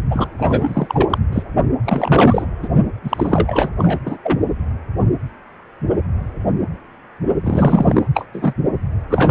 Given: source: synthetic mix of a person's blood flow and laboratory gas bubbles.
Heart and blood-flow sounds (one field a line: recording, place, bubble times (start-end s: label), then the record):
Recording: Doppler ultrasound of blood flow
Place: precordium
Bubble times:
0.10-0.27 s: bubbles
0.38-1.18 s: bubbles
1.32-1.43 s: bubbles
1.84-2.46 s: bubbles
2.62-2.68 s: bubbles
3.04-3.69 s: bubbles
3.78-3.99 s: bubbles
4.05-4.17 s: bubbles
4.23-4.40 s: bubbles
7.43-8.07 s: bubbles
8.14-8.26 s: bubbles
8.33-8.54 s: bubbles
9.10-9.31 s: bubbles
From the record:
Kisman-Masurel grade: 333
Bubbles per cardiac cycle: rolling drumbeat, 9 or more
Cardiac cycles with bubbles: 50 to 99%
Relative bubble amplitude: loud (0.450 to 0.775)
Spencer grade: 3 (all of the cardiac periods contain showers or single bubble signals, but not dominating or overriding the cardiac motion signals)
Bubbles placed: only in the low amplitude regions of the cardiac cycle